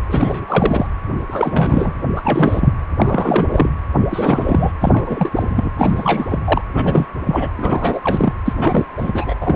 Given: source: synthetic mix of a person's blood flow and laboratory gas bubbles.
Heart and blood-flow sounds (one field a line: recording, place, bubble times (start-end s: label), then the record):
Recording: Doppler ultrasound of blood flow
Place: precordium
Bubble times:
0.08-0.86 s: bubbles
1.26-1.93 s: bubbles
2.16-2.73 s: bubbles
2.97-3.69 s: bubbles
4.10-4.72 s: bubbles
4.80-5.71 s: bubbles
5.76-6.39 s: bubbles
6.44-6.61 s: bubbles
6.74-7.06 s: bubbles
7.25-7.49 s: bubbles
7.56-8.33 s: bubbles
8.45-8.85 s: bubbles
8.96-9.35 s: bubbles
9.40-9.56 s: bubbles
From the record:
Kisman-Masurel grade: 343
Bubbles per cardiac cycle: rolling drumbeat, 9 or more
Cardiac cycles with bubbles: 100%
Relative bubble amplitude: loud (0.450 to 0.775)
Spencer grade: 3 (all of the cardiac periods contain showers or single bubble signals, but not dominating or overriding the cardiac motion signals)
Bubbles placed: anywhere in the cardiac cycle